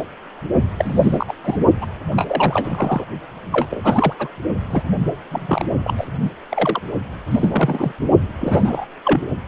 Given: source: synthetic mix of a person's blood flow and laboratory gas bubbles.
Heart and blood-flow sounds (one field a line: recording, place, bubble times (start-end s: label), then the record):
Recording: Doppler ultrasound of blood flow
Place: precordium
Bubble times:
0.00-0.08 s: bubbles
0.78-1.34 s: bubbles
1.45-1.56 s: bubbles
1.81-1.89 s: bubbles
2.09-3.04 s: bubbles
3.52-3.67 s: bubbles
3.70-4.13 s: bubbles
4.18-4.28 s: bubbles
4.70-4.83 s: bubbles
5.31-5.64 s: bubbles
5.84-5.93 s: bubbles
5.97-6.07 s: bubbles
6.21-6.31 s: bubbles
6.49-6.81 s: bubbles
7.30-7.92 s: bubbles
8.39-8.86 s: bubbles
9.04-9.25 s: bubbles
From the record:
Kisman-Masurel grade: 242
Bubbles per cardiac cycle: several, 3 to 8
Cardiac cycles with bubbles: 100%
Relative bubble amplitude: moderate (0.250 to 0.450)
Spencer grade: 3 (all of the cardiac periods contain showers or single bubble signals, but not dominating or overriding the cardiac motion signals)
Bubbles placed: only in the low amplitude regions of the cardiac cycle